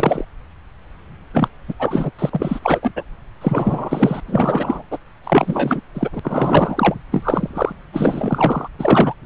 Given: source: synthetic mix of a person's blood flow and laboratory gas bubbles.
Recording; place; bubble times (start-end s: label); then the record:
Doppler ultrasound of blood flow; subclavian vein
0.00-0.24 s: bubbles
1.33-1.49 s: bubbles
1.68-1.74 s: bubbles
1.79-2.10 s: bubbles
2.18-2.59 s: bubbles
2.62-2.92 s: bubbles
2.96-3.03 s: bubbles
3.41-4.21 s: bubbles
4.26-4.83 s: bubbles
4.90-4.98 s: bubbles
5.23-5.81 s: bubbles
5.94-6.09 s: bubbles
6.12-6.19 s: bubbles
6.23-6.94 s: bubbles
7.11-7.73 s: bubbles
7.93-8.68 s: bubbles
8.79-9.15 s: bubbles
From the record:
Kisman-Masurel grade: 333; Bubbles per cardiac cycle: rolling drumbeat, 9 or more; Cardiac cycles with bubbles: 50 to 99%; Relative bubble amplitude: loud (0.450 to 0.775); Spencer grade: 3 (all of the cardiac periods contain showers or single bubble signals, but not dominating or overriding the cardiac motion signals); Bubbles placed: anywhere in the cardiac cycle